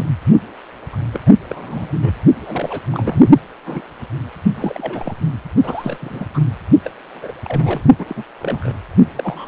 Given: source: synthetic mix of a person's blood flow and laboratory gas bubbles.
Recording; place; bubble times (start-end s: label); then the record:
Doppler ultrasound of blood flow; precordium
0.00-0.06 s: bubbles
0.93-0.97 s: bubbles
1.13-1.20 s: bubbles
1.26-1.31 s: bubbles
1.50-2.13 s: bubbles
2.42-2.80 s: bubbles
2.92-3.28 s: bubbles
3.65-3.82 s: bubbles
4.57-5.13 s: bubbles
5.64-6.26 s: bubbles
6.34-6.39 s: bubbles
6.83-6.91 s: bubbles
7.08-7.32 s: bubbles
7.44-7.81 s: bubbles
7.98-8.23 s: bubbles
8.39-8.73 s: bubbles
9.16-9.48 s: bubbles
From the record:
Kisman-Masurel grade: 232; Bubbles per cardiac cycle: several, 3 to 8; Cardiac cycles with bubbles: 50 to 99%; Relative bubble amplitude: moderate (0.250 to 0.450); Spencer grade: 3 (all of the cardiac periods contain showers or single bubble signals, but not dominating or overriding the cardiac motion signals); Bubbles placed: only in the low amplitude regions of the cardiac cycle